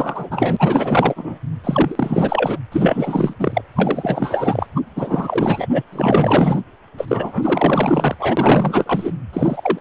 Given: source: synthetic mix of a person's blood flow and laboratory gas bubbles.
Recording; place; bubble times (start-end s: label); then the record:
Doppler ultrasound of blood flow; precordium
0.00-1.39 s: bubbles
1.64-2.58 s: bubbles
2.71-3.33 s: bubbles
3.39-3.62 s: bubbles
3.74-4.67 s: bubbles
4.75-4.81 s: bubbles
4.96-5.67 s: bubbles
5.72-5.83 s: bubbles
5.92-6.62 s: bubbles
6.98-8.16 s: bubbles
8.19-9.11 s: bubbles
9.33-9.79 s: bubbles
From the record:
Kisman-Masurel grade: 444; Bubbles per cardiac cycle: continuous sound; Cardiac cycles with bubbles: 100%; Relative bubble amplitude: maximal (0.775 to 0.999); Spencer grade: 4 (maximum detectable bubble signal sounding continuously throughout systole and diastole of every cardiac period, and overriding the amplitude of the normal cardiac signals); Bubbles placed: anywhere in the cardiac cycle